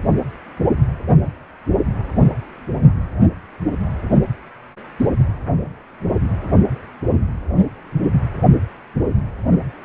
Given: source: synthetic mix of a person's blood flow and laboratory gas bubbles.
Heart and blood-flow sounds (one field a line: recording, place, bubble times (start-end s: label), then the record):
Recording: Doppler ultrasound of blood flow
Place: precordium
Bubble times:
5.00-5.07 s: bubbles
From the record:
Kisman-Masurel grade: 112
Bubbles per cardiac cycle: 1 to 2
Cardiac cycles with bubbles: 1 to 10%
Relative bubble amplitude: moderate (0.250 to 0.450)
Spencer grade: 1 (occasional bubble signal discernible with the cardiac motion signal, with majority of cardiac periods free of bubbles)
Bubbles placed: anywhere in the cardiac cycle